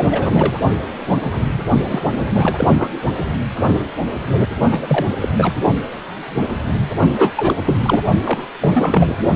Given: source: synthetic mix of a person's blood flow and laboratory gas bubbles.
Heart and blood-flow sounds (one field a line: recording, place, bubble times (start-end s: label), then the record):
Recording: Doppler ultrasound of blood flow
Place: precordium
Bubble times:
0.00-0.56 s: bubbles
1.83-2.23 s: bubbles
2.34-2.68 s: bubbles
2.77-2.88 s: bubbles
4.71-5.06 s: bubbles
5.09-5.17 s: bubbles
5.21-5.29 s: bubbles
5.37-5.54 s: bubbles
7.17-7.34 s: bubbles
7.37-7.54 s: bubbles
7.65-7.79 s: bubbles
7.83-8.02 s: bubbles
8.23-8.47 s: bubbles
8.61-9.18 s: bubbles
From the record:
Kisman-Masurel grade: 333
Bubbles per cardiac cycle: rolling drumbeat, 9 or more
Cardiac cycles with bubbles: 50 to 99%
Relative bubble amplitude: loud (0.450 to 0.775)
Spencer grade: 3 (all of the cardiac periods contain showers or single bubble signals, but not dominating or overriding the cardiac motion signals)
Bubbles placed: only in the low amplitude regions of the cardiac cycle